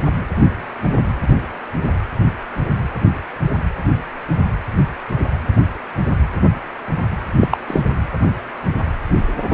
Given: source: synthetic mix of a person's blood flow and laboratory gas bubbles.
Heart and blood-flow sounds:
Doppler ultrasound of blood flow; precordium
7.41-7.48 s: bubbles
7.51-7.57 s: bubbles
7.67-7.82 s: bubbles
From the record:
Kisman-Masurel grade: 213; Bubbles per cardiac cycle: several, 3 to 8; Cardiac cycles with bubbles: 1 to 10%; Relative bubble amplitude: loud (0.450 to 0.775); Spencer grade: 1 (occasional bubble signal discernible with the cardiac motion signal, with majority of cardiac periods free of bubbles); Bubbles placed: anywhere in the cardiac cycle

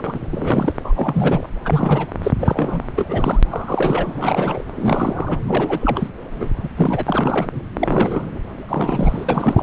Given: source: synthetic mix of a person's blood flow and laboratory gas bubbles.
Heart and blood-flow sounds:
Doppler ultrasound of blood flow; subclavian vein
0.00-0.20 s: bubbles
0.30-0.73 s: bubbles
0.83-0.93 s: bubbles
0.96-1.49 s: bubbles
1.65-2.12 s: bubbles
2.23-2.32 s: bubbles
2.39-2.83 s: bubbles
2.96-3.41 s: bubbles
3.51-4.64 s: bubbles
4.75-5.38 s: bubbles
5.46-6.09 s: bubbles
6.30-6.52 s: bubbles
6.62-6.68 s: bubbles
6.76-7.61 s: bubbles
7.77-8.26 s: bubbles
8.69-9.25 s: bubbles
9.29-9.63 s: bubbles
From the record:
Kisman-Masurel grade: 342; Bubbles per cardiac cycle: rolling drumbeat, 9 or more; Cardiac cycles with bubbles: 100%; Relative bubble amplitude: moderate (0.250 to 0.450); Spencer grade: 3 (all of the cardiac periods contain showers or single bubble signals, but not dominating or overriding the cardiac motion signals); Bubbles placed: anywhere in the cardiac cycle

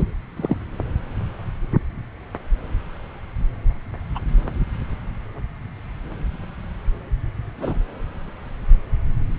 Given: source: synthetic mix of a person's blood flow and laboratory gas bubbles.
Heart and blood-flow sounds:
Doppler ultrasound of blood flow; subclavian vein
0.00-0.04 s: bubbles
0.36-0.57 s: bubbles
4.15-4.20 s: bubbles
7.60-7.78 s: bubbles
From the record:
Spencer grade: 2 (many but less than half of the cardiac periods contain bubble signals, singularly or in groups); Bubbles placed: anywhere in the cardiac cycle

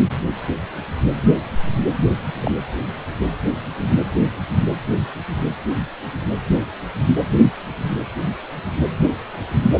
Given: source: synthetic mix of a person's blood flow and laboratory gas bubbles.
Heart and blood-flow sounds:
Doppler ultrasound of blood flow; precordium
2.40-2.51 s: bubbles
From the record:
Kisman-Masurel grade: 112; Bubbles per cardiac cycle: 1 to 2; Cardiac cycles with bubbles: 1 to 10%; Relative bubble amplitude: moderate (0.250 to 0.450); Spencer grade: 1 (occasional bubble signal discernible with the cardiac motion signal, with majority of cardiac periods free of bubbles); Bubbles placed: anywhere in the cardiac cycle

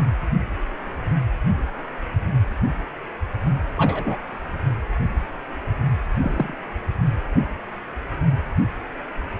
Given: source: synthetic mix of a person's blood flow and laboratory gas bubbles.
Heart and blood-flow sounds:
Doppler ultrasound of blood flow; precordium
3.77-4.17 s: bubbles
6.22-6.54 s: bubbles
From the record:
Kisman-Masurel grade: 122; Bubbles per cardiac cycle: 1 to 2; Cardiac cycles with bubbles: 10 to 50%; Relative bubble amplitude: moderate (0.250 to 0.450); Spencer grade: 2 (many but less than half of the cardiac periods contain bubble signals, singularly or in groups); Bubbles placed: anywhere in the cardiac cycle

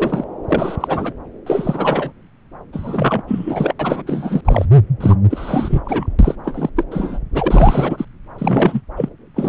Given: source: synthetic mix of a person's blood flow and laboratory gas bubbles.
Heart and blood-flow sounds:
Doppler ultrasound of blood flow; subclavian vein
0.00-0.24 s: bubbles
0.48-1.13 s: bubbles
1.46-2.12 s: bubbles
2.73-3.23 s: bubbles
3.28-3.74 s: bubbles
3.79-4.03 s: bubbles
4.07-4.41 s: bubbles
4.45-4.65 s: bubbles
5.00-5.16 s: bubbles
5.30-6.16 s: bubbles
6.19-6.36 s: bubbles
6.44-6.70 s: bubbles
6.75-6.84 s: bubbles
6.91-7.19 s: bubbles
7.34-8.05 s: bubbles
8.38-8.81 s: bubbles
8.96-9.09 s: bubbles
9.35-9.49 s: bubbles
From the record:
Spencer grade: 3 (all of the cardiac periods contain showers or single bubble signals, but not dominating or overriding the cardiac motion signals); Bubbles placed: anywhere in the cardiac cycle

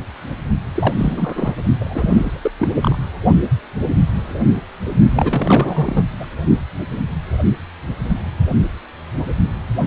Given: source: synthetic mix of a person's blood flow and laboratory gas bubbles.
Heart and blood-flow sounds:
Doppler ultrasound of blood flow; precordium
0.76-1.52 s: bubbles
1.80-2.51 s: bubbles
2.58-2.68 s: bubbles
2.82-2.96 s: bubbles
5.09-6.05 s: bubbles
6.20-6.26 s: bubbles
From the record:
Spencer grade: 3 (all of the cardiac periods contain showers or single bubble signals, but not dominating or overriding the cardiac motion signals); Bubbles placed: only in the low amplitude regions of the cardiac cycle

